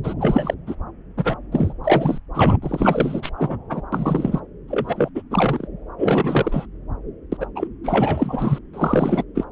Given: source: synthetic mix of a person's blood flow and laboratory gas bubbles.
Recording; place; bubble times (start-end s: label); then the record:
Doppler ultrasound of blood flow; subclavian vein
0.03-0.14 s: bubbles
0.18-0.54 s: bubbles
0.67-0.75 s: bubbles
1.17-1.36 s: bubbles
1.51-1.73 s: bubbles
1.83-2.18 s: bubbles
2.34-2.57 s: bubbles
2.62-3.30 s: bubbles
3.37-3.57 s: bubbles
3.70-3.82 s: bubbles
3.92-4.39 s: bubbles
4.68-5.09 s: bubbles
5.15-5.22 s: bubbles
5.30-5.67 s: bubbles
5.98-6.66 s: bubbles
7.32-7.37 s: bubbles
7.40-7.46 s: bubbles
7.55-7.68 s: bubbles
7.83-8.59 s: bubbles
8.73-9.23 s: bubbles
9.35-9.45 s: bubbles
From the record:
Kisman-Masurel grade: 343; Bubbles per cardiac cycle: rolling drumbeat, 9 or more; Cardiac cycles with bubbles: 100%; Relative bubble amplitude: loud (0.450 to 0.775); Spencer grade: 3 (all of the cardiac periods contain showers or single bubble signals, but not dominating or overriding the cardiac motion signals); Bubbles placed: anywhere in the cardiac cycle